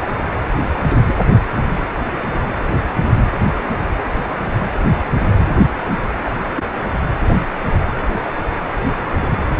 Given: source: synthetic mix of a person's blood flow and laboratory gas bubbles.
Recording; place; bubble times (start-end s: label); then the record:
Doppler ultrasound of blood flow; precordium
0.89-0.99 s: bubbles
1.06-1.15 s: bubbles
3.03-3.09 s: bubbles
6.23-6.32 s: bubbles
6.56-6.65 s: bubbles
From the record:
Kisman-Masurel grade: 121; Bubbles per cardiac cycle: 1 to 2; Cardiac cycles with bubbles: 10 to 50%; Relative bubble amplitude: barely perceptible (0.100 to 0.250); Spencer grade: 2 (many but less than half of the cardiac periods contain bubble signals, singularly or in groups); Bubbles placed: anywhere in the cardiac cycle